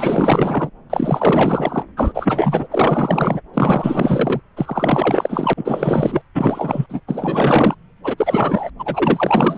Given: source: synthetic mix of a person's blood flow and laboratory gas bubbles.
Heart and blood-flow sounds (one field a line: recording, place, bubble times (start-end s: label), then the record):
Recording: Doppler ultrasound of blood flow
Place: subclavian vein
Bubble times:
0.00-0.70 s: bubbles
0.90-1.82 s: bubbles
1.97-2.67 s: bubbles
2.71-3.40 s: bubbles
3.53-4.40 s: bubbles
4.57-5.54 s: bubbles
5.57-6.21 s: bubbles
6.35-6.86 s: bubbles
6.89-7.00 s: bubbles
7.07-7.75 s: bubbles
8.04-8.15 s: bubbles
8.17-8.70 s: bubbles
8.79-9.58 s: bubbles
From the record:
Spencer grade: 4 (maximum detectable bubble signal sounding continuously throughout systole and diastole of every cardiac period, and overriding the amplitude of the normal cardiac signals)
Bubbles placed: anywhere in the cardiac cycle